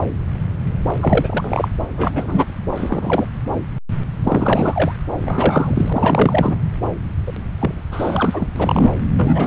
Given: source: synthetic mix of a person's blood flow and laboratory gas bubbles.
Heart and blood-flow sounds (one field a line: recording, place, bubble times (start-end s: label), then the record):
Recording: Doppler ultrasound of blood flow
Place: subclavian vein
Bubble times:
0.99-1.68 s: bubbles
1.98-2.45 s: bubbles
2.75-3.27 s: bubbles
4.24-4.92 s: bubbles
5.22-6.57 s: bubbles
7.27-7.33 s: bubbles
7.60-7.82 s: bubbles
7.91-8.48 s: bubbles
8.56-8.91 s: bubbles
9.16-9.47 s: bubbles
From the record:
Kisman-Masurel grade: 333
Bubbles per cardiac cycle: rolling drumbeat, 9 or more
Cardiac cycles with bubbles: 50 to 99%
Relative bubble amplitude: loud (0.450 to 0.775)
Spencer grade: 3 (all of the cardiac periods contain showers or single bubble signals, but not dominating or overriding the cardiac motion signals)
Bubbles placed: anywhere in the cardiac cycle